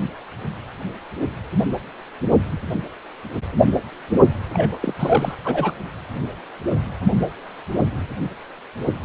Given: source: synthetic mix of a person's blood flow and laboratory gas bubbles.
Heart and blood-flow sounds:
Doppler ultrasound of blood flow; precordium
4.53-4.78 s: bubbles
4.81-4.94 s: bubbles
4.99-5.36 s: bubbles
5.44-5.72 s: bubbles
From the record:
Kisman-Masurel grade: 212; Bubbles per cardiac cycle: several, 3 to 8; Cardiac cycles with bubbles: 1 to 10%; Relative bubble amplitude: moderate (0.250 to 0.450); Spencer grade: 1 (occasional bubble signal discernible with the cardiac motion signal, with majority of cardiac periods free of bubbles); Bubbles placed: anywhere in the cardiac cycle

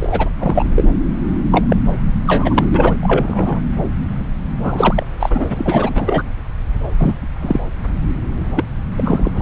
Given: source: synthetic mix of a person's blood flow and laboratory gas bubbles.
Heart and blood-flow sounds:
Doppler ultrasound of blood flow; subclavian vein
0.00-0.30 s: bubbles
0.39-0.64 s: bubbles
0.76-0.83 s: bubbles
1.52-1.66 s: bubbles
1.68-1.77 s: bubbles
2.27-2.65 s: bubbles
2.74-2.96 s: bubbles
3.02-3.60 s: bubbles
3.81-3.87 s: bubbles
4.63-5.06 s: bubbles
5.19-6.22 s: bubbles
6.98-7.13 s: bubbles
7.41-7.59 s: bubbles
8.56-8.64 s: bubbles
8.97-9.30 s: bubbles
9.34-9.42 s: bubbles
From the record:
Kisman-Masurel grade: 243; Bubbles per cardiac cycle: several, 3 to 8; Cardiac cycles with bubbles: 100%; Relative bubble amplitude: loud (0.450 to 0.775); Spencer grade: 3 (all of the cardiac periods contain showers or single bubble signals, but not dominating or overriding the cardiac motion signals); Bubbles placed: anywhere in the cardiac cycle

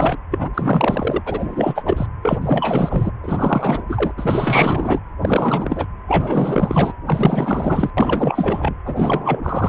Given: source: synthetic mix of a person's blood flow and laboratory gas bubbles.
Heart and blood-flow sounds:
Doppler ultrasound of blood flow; precordium
0.00-0.18 s: bubbles
0.31-0.49 s: bubbles
0.54-1.22 s: bubbles
1.26-2.06 s: bubbles
2.22-3.11 s: bubbles
3.22-3.83 s: bubbles
3.89-4.13 s: bubbles
4.17-5.01 s: bubbles
5.21-5.86 s: bubbles
6.08-6.93 s: bubbles
7.06-7.91 s: bubbles
7.97-8.74 s: bubbles
8.84-9.69 s: bubbles
From the record:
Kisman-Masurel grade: 444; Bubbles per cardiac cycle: continuous sound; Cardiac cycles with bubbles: 100%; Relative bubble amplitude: maximal (0.775 to 0.999); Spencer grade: 4 (maximum detectable bubble signal sounding continuously throughout systole and diastole of every cardiac period, and overriding the amplitude of the normal cardiac signals); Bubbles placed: anywhere in the cardiac cycle

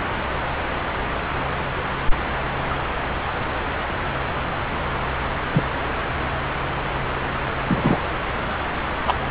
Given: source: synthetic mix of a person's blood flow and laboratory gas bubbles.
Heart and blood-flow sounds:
Doppler ultrasound of blood flow; subclavian vein
2.70-2.75 s: bubbles
5.51-5.63 s: bubbles
7.68-8.07 s: bubbles
9.06-9.13 s: bubbles
From the record:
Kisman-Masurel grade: 123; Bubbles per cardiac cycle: 1 to 2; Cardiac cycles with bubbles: 10 to 50%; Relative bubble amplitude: loud (0.450 to 0.775); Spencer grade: 2 (many but less than half of the cardiac periods contain bubble signals, singularly or in groups); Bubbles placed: anywhere in the cardiac cycle

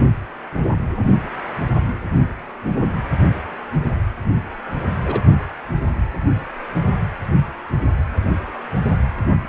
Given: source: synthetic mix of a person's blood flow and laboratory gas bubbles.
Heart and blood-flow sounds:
Doppler ultrasound of blood flow; precordium
5.04-5.21 s: bubbles
From the record:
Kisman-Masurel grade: 112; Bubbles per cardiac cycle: 1 to 2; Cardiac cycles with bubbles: 1 to 10%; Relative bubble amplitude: moderate (0.250 to 0.450); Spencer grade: 1 (occasional bubble signal discernible with the cardiac motion signal, with majority of cardiac periods free of bubbles); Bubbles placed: anywhere in the cardiac cycle

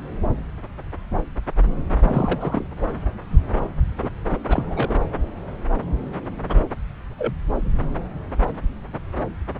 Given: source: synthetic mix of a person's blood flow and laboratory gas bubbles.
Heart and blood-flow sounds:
Doppler ultrasound of blood flow; subclavian vein
2.03-2.65 s: bubbles
4.02-4.09 s: bubbles
4.30-4.38 s: bubbles
4.48-4.66 s: bubbles
4.69-4.94 s: bubbles
6.49-6.54 s: bubbles
7.18-7.33 s: bubbles
7.60-7.72 s: bubbles
From the record:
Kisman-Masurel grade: 222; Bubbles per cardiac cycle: several, 3 to 8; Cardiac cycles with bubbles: 10 to 50%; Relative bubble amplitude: moderate (0.250 to 0.450); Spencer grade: 2 (many but less than half of the cardiac periods contain bubble signals, singularly or in groups); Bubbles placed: anywhere in the cardiac cycle

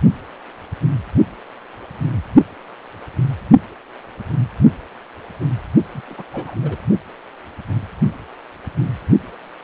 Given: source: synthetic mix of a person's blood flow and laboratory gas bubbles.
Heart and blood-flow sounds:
Doppler ultrasound of blood flow; precordium
5.92-6.01 s: bubbles
6.10-6.23 s: bubbles
6.33-6.56 s: bubbles
6.62-6.78 s: bubbles
From the record:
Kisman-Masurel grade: 221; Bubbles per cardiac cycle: several, 3 to 8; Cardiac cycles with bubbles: 10 to 50%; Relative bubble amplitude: barely perceptible (0.100 to 0.250); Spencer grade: 2 (many but less than half of the cardiac periods contain bubble signals, singularly or in groups); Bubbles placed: only in the low amplitude regions of the cardiac cycle

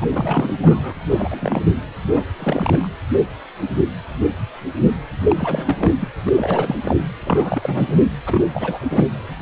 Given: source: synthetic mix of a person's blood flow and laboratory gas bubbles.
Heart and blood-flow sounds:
Doppler ultrasound of blood flow; precordium
0.00-0.07 s: bubbles
0.12-0.57 s: bubbles
0.62-0.93 s: bubbles
1.08-1.62 s: bubbles
2.06-2.25 s: bubbles
2.38-2.88 s: bubbles
5.23-5.93 s: bubbles
6.00-6.08 s: bubbles
6.26-6.33 s: bubbles
6.36-6.76 s: bubbles
6.84-6.97 s: bubbles
7.25-7.99 s: bubbles
8.26-8.51 s: bubbles
8.54-8.79 s: bubbles
8.89-9.06 s: bubbles
From the record:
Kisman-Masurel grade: 332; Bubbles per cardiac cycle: rolling drumbeat, 9 or more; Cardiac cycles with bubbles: 50 to 99%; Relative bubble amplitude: moderate (0.250 to 0.450); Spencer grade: 3 (all of the cardiac periods contain showers or single bubble signals, but not dominating or overriding the cardiac motion signals); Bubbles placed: anywhere in the cardiac cycle

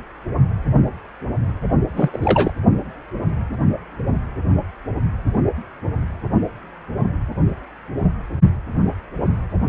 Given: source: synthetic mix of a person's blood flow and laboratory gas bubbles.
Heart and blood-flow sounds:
Doppler ultrasound of blood flow; precordium
1.95-2.17 s: bubbles
2.20-2.51 s: bubbles
From the record:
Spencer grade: 1 (occasional bubble signal discernible with the cardiac motion signal, with majority of cardiac periods free of bubbles); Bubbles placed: only in the low amplitude regions of the cardiac cycle

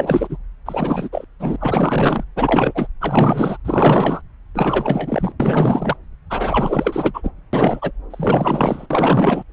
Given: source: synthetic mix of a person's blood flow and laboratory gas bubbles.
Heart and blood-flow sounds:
Doppler ultrasound of blood flow; subclavian vein
0.00-0.37 s: bubbles
0.66-1.09 s: bubbles
1.12-1.24 s: bubbles
1.39-1.56 s: bubbles
1.60-2.24 s: bubbles
2.36-2.87 s: bubbles
3.00-3.58 s: bubbles
3.64-4.21 s: bubbles
4.54-5.32 s: bubbles
5.39-5.96 s: bubbles
6.29-7.31 s: bubbles
7.53-7.92 s: bubbles
8.10-8.87 s: bubbles
8.90-9.43 s: bubbles
From the record:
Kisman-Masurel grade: 444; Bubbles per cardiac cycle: continuous sound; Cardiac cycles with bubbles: 100%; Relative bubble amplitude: maximal (0.775 to 0.999); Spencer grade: 4 (maximum detectable bubble signal sounding continuously throughout systole and diastole of every cardiac period, and overriding the amplitude of the normal cardiac signals); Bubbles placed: anywhere in the cardiac cycle

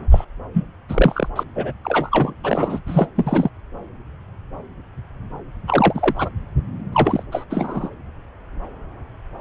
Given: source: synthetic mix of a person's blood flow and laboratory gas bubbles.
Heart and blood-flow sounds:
Doppler ultrasound of blood flow; subclavian vein
0.11-0.24 s: bubbles
0.54-0.68 s: bubbles
0.89-1.29 s: bubbles
1.35-1.44 s: bubbles
1.55-1.73 s: bubbles
1.84-2.33 s: bubbles
2.43-2.79 s: bubbles
2.86-3.09 s: bubbles
3.16-3.49 s: bubbles
5.67-6.29 s: bubbles
6.92-7.23 s: bubbles
7.31-7.44 s: bubbles
7.50-7.90 s: bubbles
From the record:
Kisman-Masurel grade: 232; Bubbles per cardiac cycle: several, 3 to 8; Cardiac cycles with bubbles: 50 to 99%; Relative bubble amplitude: moderate (0.250 to 0.450); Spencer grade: 3 (all of the cardiac periods contain showers or single bubble signals, but not dominating or overriding the cardiac motion signals); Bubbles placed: anywhere in the cardiac cycle

